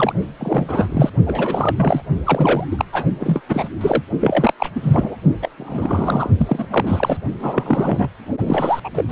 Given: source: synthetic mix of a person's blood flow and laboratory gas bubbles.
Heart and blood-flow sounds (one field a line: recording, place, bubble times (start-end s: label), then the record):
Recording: Doppler ultrasound of blood flow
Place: precordium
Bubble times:
0.00-0.13 s: bubbles
0.39-1.11 s: bubbles
1.26-2.02 s: bubbles
2.25-2.66 s: bubbles
2.71-2.85 s: bubbles
2.92-3.04 s: bubbles
3.19-3.41 s: bubbles
3.48-3.68 s: bubbles
3.80-4.03 s: bubbles
4.21-4.53 s: bubbles
4.58-4.70 s: bubbles
4.75-4.80 s: bubbles
4.83-5.16 s: bubbles
5.42-5.50 s: bubbles
5.58-6.30 s: bubbles
6.37-6.66 s: bubbles
6.70-7.21 s: bubbles
7.39-8.08 s: bubbles
8.46-8.80 s: bubbles
8.84-8.89 s: bubbles
8.93-9.04 s: bubbles
9.08-9.12 s: bubbles
From the record:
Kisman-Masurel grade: 343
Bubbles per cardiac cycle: rolling drumbeat, 9 or more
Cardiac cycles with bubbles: 100%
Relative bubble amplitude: loud (0.450 to 0.775)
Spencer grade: 3 (all of the cardiac periods contain showers or single bubble signals, but not dominating or overriding the cardiac motion signals)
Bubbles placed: only in the low amplitude regions of the cardiac cycle